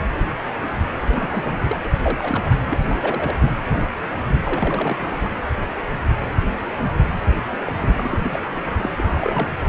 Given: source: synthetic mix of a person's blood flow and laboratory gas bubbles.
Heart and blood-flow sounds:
Doppler ultrasound of blood flow; precordium
0.98-1.89 s: bubbles
2.03-2.62 s: bubbles
2.70-3.37 s: bubbles
4.45-5.29 s: bubbles
7.67-7.72 s: bubbles
7.79-8.45 s: bubbles
8.50-8.72 s: bubbles
8.82-8.90 s: bubbles
8.96-9.51 s: bubbles
From the record:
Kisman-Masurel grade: 232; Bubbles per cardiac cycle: several, 3 to 8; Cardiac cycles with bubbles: 50 to 99%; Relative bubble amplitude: moderate (0.250 to 0.450); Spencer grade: 3 (all of the cardiac periods contain showers or single bubble signals, but not dominating or overriding the cardiac motion signals); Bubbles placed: anywhere in the cardiac cycle

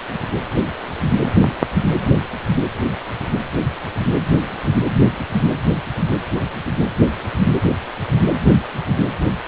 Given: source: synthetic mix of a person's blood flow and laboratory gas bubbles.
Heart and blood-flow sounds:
Doppler ultrasound of blood flow; precordium
no bubbles
From the record:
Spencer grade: 0 (complete lack of bubble signals)

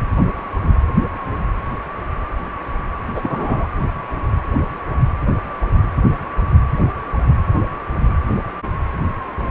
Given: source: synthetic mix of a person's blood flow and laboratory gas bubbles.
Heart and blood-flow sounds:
Doppler ultrasound of blood flow; precordium
3.15-3.67 s: bubbles
From the record:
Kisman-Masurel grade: 113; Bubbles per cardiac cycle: 1 to 2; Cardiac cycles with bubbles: 1 to 10%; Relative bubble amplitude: loud (0.450 to 0.775); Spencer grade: 1 (occasional bubble signal discernible with the cardiac motion signal, with majority of cardiac periods free of bubbles); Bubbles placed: anywhere in the cardiac cycle

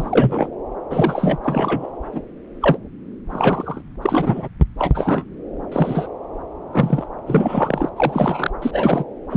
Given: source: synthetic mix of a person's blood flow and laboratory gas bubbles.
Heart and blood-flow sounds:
Doppler ultrasound of blood flow; subclavian vein
0.00-0.48 s: bubbles
0.90-1.37 s: bubbles
1.44-1.92 s: bubbles
2.12-2.23 s: bubbles
2.62-2.77 s: bubbles
3.29-3.81 s: bubbles
4.02-4.49 s: bubbles
4.79-5.24 s: bubbles
5.71-6.08 s: bubbles
6.72-7.07 s: bubbles
7.26-7.89 s: bubbles
7.96-8.50 s: bubbles
8.61-9.04 s: bubbles
9.30-9.37 s: bubbles
From the record:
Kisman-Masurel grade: 243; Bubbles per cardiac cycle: several, 3 to 8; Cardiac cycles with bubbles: 100%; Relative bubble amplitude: loud (0.450 to 0.775); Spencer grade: 3 (all of the cardiac periods contain showers or single bubble signals, but not dominating or overriding the cardiac motion signals); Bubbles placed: anywhere in the cardiac cycle

